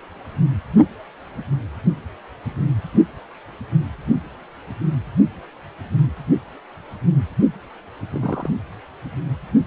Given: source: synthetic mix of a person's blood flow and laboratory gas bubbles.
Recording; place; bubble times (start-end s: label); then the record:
Doppler ultrasound of blood flow; precordium
8.11-8.50 s: bubbles
From the record:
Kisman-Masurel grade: 112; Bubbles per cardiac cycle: 1 to 2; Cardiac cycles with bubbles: 1 to 10%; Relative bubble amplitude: moderate (0.250 to 0.450); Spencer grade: 1 (occasional bubble signal discernible with the cardiac motion signal, with majority of cardiac periods free of bubbles); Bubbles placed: only in the low amplitude regions of the cardiac cycle